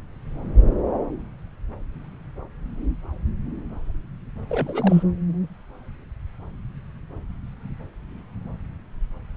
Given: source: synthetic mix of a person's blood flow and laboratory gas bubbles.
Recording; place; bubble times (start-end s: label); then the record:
Doppler ultrasound of blood flow; subclavian vein
4.48-5.03 s: bubbles
From the record:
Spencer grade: 1 (occasional bubble signal discernible with the cardiac motion signal, with majority of cardiac periods free of bubbles); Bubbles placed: anywhere in the cardiac cycle